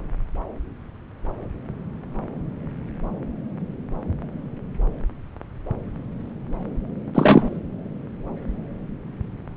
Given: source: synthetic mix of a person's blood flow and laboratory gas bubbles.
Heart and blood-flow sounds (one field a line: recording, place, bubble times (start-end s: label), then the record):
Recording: Doppler ultrasound of blood flow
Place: subclavian vein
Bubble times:
7.14-7.60 s: bubbles
From the record:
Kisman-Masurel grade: 113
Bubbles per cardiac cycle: 1 to 2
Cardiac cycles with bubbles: 1 to 10%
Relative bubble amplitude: loud (0.450 to 0.775)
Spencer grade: 1 (occasional bubble signal discernible with the cardiac motion signal, with majority of cardiac periods free of bubbles)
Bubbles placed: anywhere in the cardiac cycle